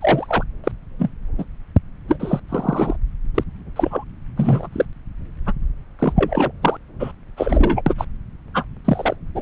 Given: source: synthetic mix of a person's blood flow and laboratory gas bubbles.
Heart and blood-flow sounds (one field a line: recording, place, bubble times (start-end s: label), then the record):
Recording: Doppler ultrasound of blood flow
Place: subclavian vein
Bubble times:
0.01-0.45 s: bubbles
0.64-0.72 s: bubbles
0.99-1.10 s: bubbles
1.38-1.45 s: bubbles
2.08-2.40 s: bubbles
2.49-2.96 s: bubbles
3.34-3.44 s: bubbles
3.75-4.04 s: bubbles
4.37-4.67 s: bubbles
4.72-4.86 s: bubbles
5.46-5.53 s: bubbles
5.99-6.13 s: bubbles
6.16-6.52 s: bubbles
6.62-6.77 s: bubbles
7.00-7.12 s: bubbles
7.37-7.82 s: bubbles
7.86-7.94 s: bubbles
7.98-8.05 s: bubbles
8.54-8.65 s: bubbles
8.84-9.16 s: bubbles
9.34-9.41 s: bubbles
From the record:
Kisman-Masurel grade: 243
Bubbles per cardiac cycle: several, 3 to 8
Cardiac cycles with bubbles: 100%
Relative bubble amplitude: loud (0.450 to 0.775)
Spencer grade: 3 (all of the cardiac periods contain showers or single bubble signals, but not dominating or overriding the cardiac motion signals)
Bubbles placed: anywhere in the cardiac cycle